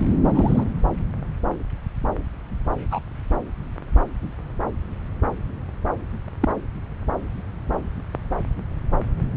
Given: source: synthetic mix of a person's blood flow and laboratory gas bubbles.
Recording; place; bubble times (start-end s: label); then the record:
Doppler ultrasound of blood flow; subclavian vein
0.34-0.64 s: bubbles
2.91-3.00 s: bubbles
6.41-6.49 s: bubbles
From the record:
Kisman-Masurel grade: 122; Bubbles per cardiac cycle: 1 to 2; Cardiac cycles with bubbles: 10 to 50%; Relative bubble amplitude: moderate (0.250 to 0.450); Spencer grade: 2 (many but less than half of the cardiac periods contain bubble signals, singularly or in groups); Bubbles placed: anywhere in the cardiac cycle